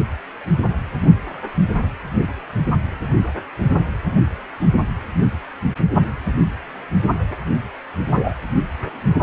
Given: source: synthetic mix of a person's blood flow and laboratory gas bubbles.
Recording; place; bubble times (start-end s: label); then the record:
Doppler ultrasound of blood flow; precordium
8.10-8.33 s: bubbles
From the record:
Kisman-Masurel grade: 113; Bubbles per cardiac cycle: 1 to 2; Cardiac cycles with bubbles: 1 to 10%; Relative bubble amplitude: loud (0.450 to 0.775); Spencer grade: 1 (occasional bubble signal discernible with the cardiac motion signal, with majority of cardiac periods free of bubbles); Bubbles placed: anywhere in the cardiac cycle